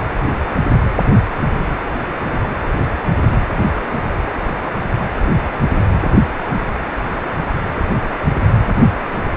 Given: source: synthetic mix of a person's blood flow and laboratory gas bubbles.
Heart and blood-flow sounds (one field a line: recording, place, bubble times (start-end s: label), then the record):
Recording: Doppler ultrasound of blood flow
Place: precordium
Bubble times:
2.26-2.37 s: bubbles
3.28-3.38 s: bubbles
3.92-3.98 s: bubbles
9.03-9.13 s: bubbles
From the record:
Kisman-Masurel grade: 121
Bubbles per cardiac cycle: 1 to 2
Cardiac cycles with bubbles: 10 to 50%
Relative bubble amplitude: barely perceptible (0.100 to 0.250)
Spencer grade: 2 (many but less than half of the cardiac periods contain bubble signals, singularly or in groups)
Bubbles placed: anywhere in the cardiac cycle